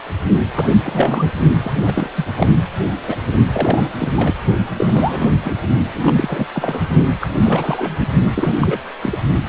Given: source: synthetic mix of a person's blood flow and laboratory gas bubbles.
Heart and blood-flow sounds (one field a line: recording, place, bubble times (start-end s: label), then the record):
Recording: Doppler ultrasound of blood flow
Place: precordium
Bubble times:
0.54-0.73 s: bubbles
0.83-1.32 s: bubbles
1.63-1.72 s: bubbles
1.76-2.10 s: bubbles
2.16-2.26 s: bubbles
2.36-2.48 s: bubbles
3.07-3.17 s: bubbles
3.52-3.91 s: bubbles
4.00-4.08 s: bubbles
4.13-4.34 s: bubbles
4.76-5.29 s: bubbles
5.43-5.54 s: bubbles
5.93-6.47 s: bubbles
6.54-6.93 s: bubbles
7.21-7.27 s: bubbles
7.42-8.07 s: bubbles
8.35-8.57 s: bubbles
8.60-8.80 s: bubbles
9.02-9.16 s: bubbles
9.45-9.49 s: bubbles
From the record:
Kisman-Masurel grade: 342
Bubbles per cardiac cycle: rolling drumbeat, 9 or more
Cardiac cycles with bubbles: 100%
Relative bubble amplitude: moderate (0.250 to 0.450)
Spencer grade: 3 (all of the cardiac periods contain showers or single bubble signals, but not dominating or overriding the cardiac motion signals)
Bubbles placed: only in the low amplitude regions of the cardiac cycle